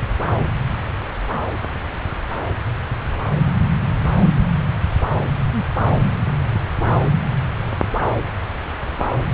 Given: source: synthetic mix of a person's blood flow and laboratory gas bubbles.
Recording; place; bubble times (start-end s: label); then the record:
Doppler ultrasound of blood flow; subclavian vein
no bubbles
From the record:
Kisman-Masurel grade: 000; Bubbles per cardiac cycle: 0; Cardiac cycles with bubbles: 0%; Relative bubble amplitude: no bubbles discernible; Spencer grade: 0 (complete lack of bubble signals)